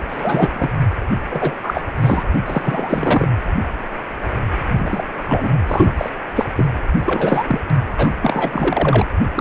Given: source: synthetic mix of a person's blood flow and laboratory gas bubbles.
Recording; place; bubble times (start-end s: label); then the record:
Doppler ultrasound of blood flow; precordium
0.00-0.04 s: bubbles
0.09-0.52 s: bubbles
0.54-0.69 s: bubbles
1.28-1.55 s: bubbles
1.62-1.82 s: bubbles
2.00-2.25 s: bubbles
2.46-3.28 s: bubbles
4.78-5.04 s: bubbles
5.24-5.52 s: bubbles
5.68-5.95 s: bubbles
5.97-6.09 s: bubbles
6.35-6.46 s: bubbles
6.55-6.68 s: bubbles
7.05-7.60 s: bubbles
7.96-8.11 s: bubbles
8.22-9.06 s: bubbles
9.35-9.41 s: bubbles
From the record:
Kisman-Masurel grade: 333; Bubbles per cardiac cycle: rolling drumbeat, 9 or more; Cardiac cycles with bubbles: 50 to 99%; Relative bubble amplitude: loud (0.450 to 0.775); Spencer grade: 3 (all of the cardiac periods contain showers or single bubble signals, but not dominating or overriding the cardiac motion signals); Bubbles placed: anywhere in the cardiac cycle